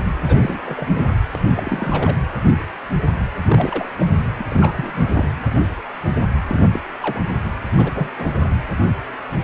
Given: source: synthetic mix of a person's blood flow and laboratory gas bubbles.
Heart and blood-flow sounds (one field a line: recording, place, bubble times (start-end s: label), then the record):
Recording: Doppler ultrasound of blood flow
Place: precordium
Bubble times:
0.27-0.61 s: bubbles
0.65-0.88 s: bubbles
0.95-1.15 s: bubbles
1.35-1.40 s: bubbles
1.43-2.18 s: bubbles
3.48-3.89 s: bubbles
3.98-4.06 s: bubbles
4.38-4.46 s: bubbles
4.50-5.07 s: bubbles
5.11-5.32 s: bubbles
6.47-6.60 s: bubbles
6.72-6.80 s: bubbles
7.00-7.21 s: bubbles
7.77-7.92 s: bubbles
7.94-8.10 s: bubbles
8.18-8.26 s: bubbles
8.44-8.50 s: bubbles
From the record:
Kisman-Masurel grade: 232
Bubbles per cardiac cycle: several, 3 to 8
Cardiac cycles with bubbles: 50 to 99%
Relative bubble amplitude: moderate (0.250 to 0.450)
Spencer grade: 3 (all of the cardiac periods contain showers or single bubble signals, but not dominating or overriding the cardiac motion signals)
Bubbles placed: anywhere in the cardiac cycle